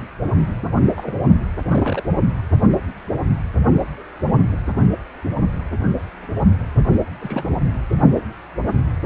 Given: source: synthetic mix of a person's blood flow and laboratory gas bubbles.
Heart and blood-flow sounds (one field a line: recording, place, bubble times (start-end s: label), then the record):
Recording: Doppler ultrasound of blood flow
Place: precordium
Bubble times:
0.97-1.25 s: bubbles
1.65-2.04 s: bubbles
7.21-7.55 s: bubbles
From the record:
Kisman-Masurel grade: 122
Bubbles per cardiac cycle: 1 to 2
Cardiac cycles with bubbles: 10 to 50%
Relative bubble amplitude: moderate (0.250 to 0.450)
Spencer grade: 2 (many but less than half of the cardiac periods contain bubble signals, singularly or in groups)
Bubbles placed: anywhere in the cardiac cycle